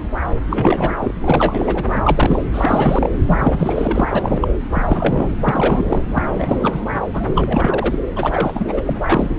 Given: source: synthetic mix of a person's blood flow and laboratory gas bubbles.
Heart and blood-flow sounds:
Doppler ultrasound of blood flow; subclavian vein
0.48-0.97 s: bubbles
1.00-1.12 s: bubbles
1.23-1.84 s: bubbles
1.94-2.01 s: bubbles
2.04-2.42 s: bubbles
2.54-3.10 s: bubbles
3.27-4.48 s: bubbles
4.74-5.35 s: bubbles
5.42-6.04 s: bubbles
6.10-6.81 s: bubbles
7.13-7.99 s: bubbles
8.16-8.81 s: bubbles
8.86-8.96 s: bubbles
9.01-9.37 s: bubbles
From the record:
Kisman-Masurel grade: 343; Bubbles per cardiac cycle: rolling drumbeat, 9 or more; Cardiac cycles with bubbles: 100%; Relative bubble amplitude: loud (0.450 to 0.775); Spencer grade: 3 (all of the cardiac periods contain showers or single bubble signals, but not dominating or overriding the cardiac motion signals); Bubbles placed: anywhere in the cardiac cycle

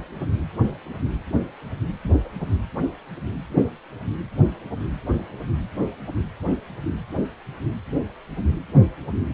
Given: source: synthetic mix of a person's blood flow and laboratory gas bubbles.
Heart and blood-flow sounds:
Doppler ultrasound of blood flow; precordium
no bubbles
From the record:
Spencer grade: 0 (complete lack of bubble signals)

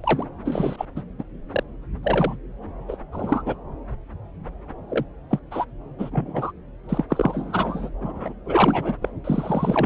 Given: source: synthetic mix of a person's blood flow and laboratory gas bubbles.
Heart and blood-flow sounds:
Doppler ultrasound of blood flow; subclavian vein
0.03-0.26 s: bubbles
0.45-0.85 s: bubbles
0.95-1.01 s: bubbles
1.19-1.23 s: bubbles
1.51-1.63 s: bubbles
2.03-2.36 s: bubbles
2.88-2.96 s: bubbles
3.12-3.42 s: bubbles
3.46-3.54 s: bubbles
4.89-5.05 s: bubbles
5.30-5.39 s: bubbles
5.51-5.65 s: bubbles
5.98-6.51 s: bubbles
6.88-7.04 s: bubbles
7.09-7.89 s: bubbles
8.00-8.35 s: bubbles
8.45-8.94 s: bubbles
9.02-9.09 s: bubbles
9.24-9.86 s: bubbles
From the record:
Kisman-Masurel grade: 232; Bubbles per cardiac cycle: several, 3 to 8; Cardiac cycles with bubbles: 50 to 99%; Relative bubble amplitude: moderate (0.250 to 0.450); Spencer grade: 3 (all of the cardiac periods contain showers or single bubble signals, but not dominating or overriding the cardiac motion signals); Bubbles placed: anywhere in the cardiac cycle

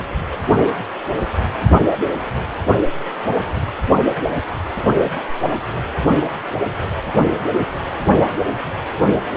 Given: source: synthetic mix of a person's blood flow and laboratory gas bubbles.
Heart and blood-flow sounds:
Doppler ultrasound of blood flow; precordium
1.92-1.98 s: bubbles
From the record:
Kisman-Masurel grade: 123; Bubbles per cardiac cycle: 1 to 2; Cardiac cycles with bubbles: 10 to 50%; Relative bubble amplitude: loud (0.450 to 0.775); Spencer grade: 2 (many but less than half of the cardiac periods contain bubble signals, singularly or in groups); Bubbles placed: only in the low amplitude regions of the cardiac cycle

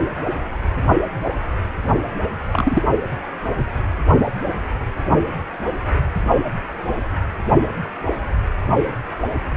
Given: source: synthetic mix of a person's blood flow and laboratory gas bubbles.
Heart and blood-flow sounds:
Doppler ultrasound of blood flow; precordium
2.52-2.83 s: bubbles
From the record:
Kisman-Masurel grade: 113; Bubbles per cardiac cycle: 1 to 2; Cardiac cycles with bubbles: 1 to 10%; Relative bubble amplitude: loud (0.450 to 0.775); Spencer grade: 1 (occasional bubble signal discernible with the cardiac motion signal, with majority of cardiac periods free of bubbles); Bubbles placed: only in the low amplitude regions of the cardiac cycle

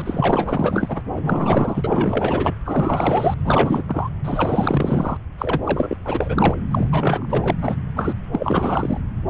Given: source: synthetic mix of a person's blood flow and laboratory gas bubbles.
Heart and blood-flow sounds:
Doppler ultrasound of blood flow; subclavian vein
0.00-1.01 s: bubbles
1.12-2.54 s: bubbles
2.65-3.34 s: bubbles
3.44-3.83 s: bubbles
3.87-4.10 s: bubbles
4.24-5.17 s: bubbles
5.38-5.62 s: bubbles
5.64-5.96 s: bubbles
6.04-6.54 s: bubbles
6.71-7.56 s: bubbles
7.61-7.77 s: bubbles
7.96-8.14 s: bubbles
8.32-8.98 s: bubbles
From the record:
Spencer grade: 4 (maximum detectable bubble signal sounding continuously throughout systole and diastole of every cardiac period, and overriding the amplitude of the normal cardiac signals); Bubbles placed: anywhere in the cardiac cycle

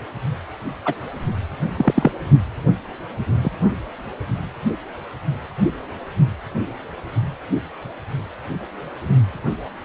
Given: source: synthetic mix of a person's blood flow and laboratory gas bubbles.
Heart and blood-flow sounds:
Doppler ultrasound of blood flow; precordium
0.85-0.94 s: bubbles
1.76-2.11 s: bubbles
3.43-3.50 s: bubbles
From the record:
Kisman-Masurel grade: 123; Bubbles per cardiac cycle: 1 to 2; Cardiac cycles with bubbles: 10 to 50%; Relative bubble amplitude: loud (0.450 to 0.775); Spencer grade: 2 (many but less than half of the cardiac periods contain bubble signals, singularly or in groups); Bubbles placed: only in the low amplitude regions of the cardiac cycle

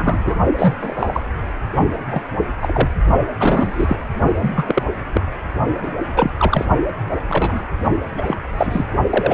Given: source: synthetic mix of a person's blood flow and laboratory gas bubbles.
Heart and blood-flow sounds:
Doppler ultrasound of blood flow; precordium
0.00-0.38 s: bubbles
0.58-0.74 s: bubbles
0.80-1.20 s: bubbles
2.10-2.23 s: bubbles
2.60-2.89 s: bubbles
3.40-3.97 s: bubbles
4.42-4.83 s: bubbles
5.12-5.21 s: bubbles
5.82-5.90 s: bubbles
6.14-6.30 s: bubbles
6.38-6.67 s: bubbles
7.28-7.65 s: bubbles
8.17-8.22 s: bubbles
8.26-8.37 s: bubbles
8.57-8.91 s: bubbles
9.10-9.34 s: bubbles
From the record:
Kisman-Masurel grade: 242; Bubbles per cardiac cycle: several, 3 to 8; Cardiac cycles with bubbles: 100%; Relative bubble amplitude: moderate (0.250 to 0.450); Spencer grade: 3 (all of the cardiac periods contain showers or single bubble signals, but not dominating or overriding the cardiac motion signals); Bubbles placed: only in the low amplitude regions of the cardiac cycle

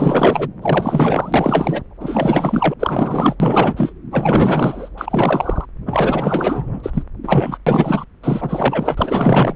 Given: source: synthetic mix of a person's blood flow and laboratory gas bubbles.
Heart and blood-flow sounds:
Doppler ultrasound of blood flow; subclavian vein
0.00-0.48 s: bubbles
0.61-1.82 s: bubbles
2.00-2.74 s: bubbles
2.79-3.35 s: bubbles
3.40-3.92 s: bubbles
4.11-4.89 s: bubbles
4.97-5.65 s: bubbles
5.85-7.03 s: bubbles
7.23-7.58 s: bubbles
7.67-8.04 s: bubbles
8.23-9.54 s: bubbles
From the record:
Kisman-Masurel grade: 444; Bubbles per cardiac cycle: continuous sound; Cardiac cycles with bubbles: 100%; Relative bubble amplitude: maximal (0.775 to 0.999); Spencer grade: 4 (maximum detectable bubble signal sounding continuously throughout systole and diastole of every cardiac period, and overriding the amplitude of the normal cardiac signals); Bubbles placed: anywhere in the cardiac cycle

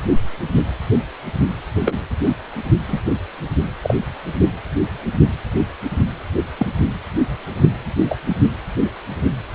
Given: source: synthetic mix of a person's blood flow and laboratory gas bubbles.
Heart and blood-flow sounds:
Doppler ultrasound of blood flow; precordium
1.85-1.94 s: bubbles
2.86-3.02 s: bubbles
3.82-3.94 s: bubbles
6.58-6.67 s: bubbles
8.09-8.18 s: bubbles
From the record:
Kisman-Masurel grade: 122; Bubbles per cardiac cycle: 1 to 2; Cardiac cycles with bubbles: 10 to 50%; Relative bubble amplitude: moderate (0.250 to 0.450); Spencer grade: 2 (many but less than half of the cardiac periods contain bubble signals, singularly or in groups); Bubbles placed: anywhere in the cardiac cycle

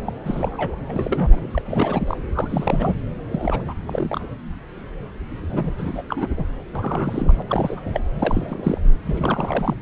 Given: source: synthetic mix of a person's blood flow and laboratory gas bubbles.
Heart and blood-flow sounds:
Doppler ultrasound of blood flow; subclavian vein
0.05-0.12 s: bubbles
0.24-0.76 s: bubbles
0.86-1.62 s: bubbles
1.65-2.17 s: bubbles
2.32-2.94 s: bubbles
3.30-3.63 s: bubbles
3.65-3.74 s: bubbles
3.86-4.28 s: bubbles
5.35-6.03 s: bubbles
6.08-6.27 s: bubbles
6.37-6.45 s: bubbles
6.75-7.43 s: bubbles
7.49-7.81 s: bubbles
7.86-8.00 s: bubbles
8.19-8.78 s: bubbles
9.06-9.75 s: bubbles
From the record:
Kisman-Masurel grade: 332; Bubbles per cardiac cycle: rolling drumbeat, 9 or more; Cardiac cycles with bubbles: 50 to 99%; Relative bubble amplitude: moderate (0.250 to 0.450); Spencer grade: 3 (all of the cardiac periods contain showers or single bubble signals, but not dominating or overriding the cardiac motion signals); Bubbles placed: anywhere in the cardiac cycle

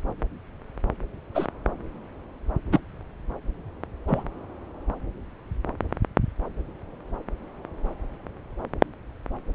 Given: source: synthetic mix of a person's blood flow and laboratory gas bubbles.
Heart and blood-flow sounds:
Doppler ultrasound of blood flow; subclavian vein
1.34-1.47 s: bubbles
2.71-2.80 s: bubbles
4.08-4.24 s: bubbles
From the record:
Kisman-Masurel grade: 123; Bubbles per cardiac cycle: 1 to 2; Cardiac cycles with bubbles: 10 to 50%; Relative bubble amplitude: loud (0.450 to 0.775); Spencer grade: 2 (many but less than half of the cardiac periods contain bubble signals, singularly or in groups); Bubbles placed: anywhere in the cardiac cycle

